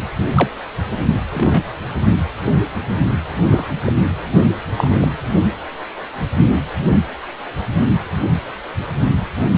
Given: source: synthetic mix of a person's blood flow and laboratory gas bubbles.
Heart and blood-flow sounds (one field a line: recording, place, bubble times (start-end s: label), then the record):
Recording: Doppler ultrasound of blood flow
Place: precordium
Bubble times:
0.35-0.48 s: bubbles
1.30-1.63 s: bubbles
3.51-3.69 s: bubbles
3.84-3.92 s: bubbles
4.76-5.06 s: bubbles
From the record:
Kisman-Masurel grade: 123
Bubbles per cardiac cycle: 1 to 2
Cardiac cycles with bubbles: 10 to 50%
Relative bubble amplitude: loud (0.450 to 0.775)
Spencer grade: 2 (many but less than half of the cardiac periods contain bubble signals, singularly or in groups)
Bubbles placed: only in the low amplitude regions of the cardiac cycle